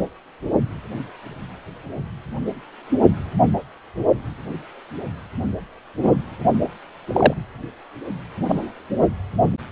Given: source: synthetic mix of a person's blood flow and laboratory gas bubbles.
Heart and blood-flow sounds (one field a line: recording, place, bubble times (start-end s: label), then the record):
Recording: Doppler ultrasound of blood flow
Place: precordium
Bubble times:
6.03-6.17 s: bubbles
7.07-7.34 s: bubbles
8.49-8.72 s: bubbles
From the record:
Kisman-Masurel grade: 123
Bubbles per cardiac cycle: 1 to 2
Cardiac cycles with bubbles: 10 to 50%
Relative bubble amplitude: loud (0.450 to 0.775)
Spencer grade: 2 (many but less than half of the cardiac periods contain bubble signals, singularly or in groups)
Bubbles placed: only in the low amplitude regions of the cardiac cycle